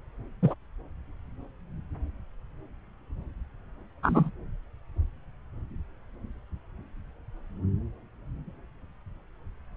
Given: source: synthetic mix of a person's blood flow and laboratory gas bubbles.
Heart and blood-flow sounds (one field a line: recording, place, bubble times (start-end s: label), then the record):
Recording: Doppler ultrasound of blood flow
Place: subclavian vein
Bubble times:
0.42-0.54 s: bubbles
4.03-4.31 s: bubbles
From the record:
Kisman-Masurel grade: 123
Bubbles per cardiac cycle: 1 to 2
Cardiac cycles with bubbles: 10 to 50%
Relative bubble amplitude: loud (0.450 to 0.775)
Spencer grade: 2 (many but less than half of the cardiac periods contain bubble signals, singularly or in groups)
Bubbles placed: anywhere in the cardiac cycle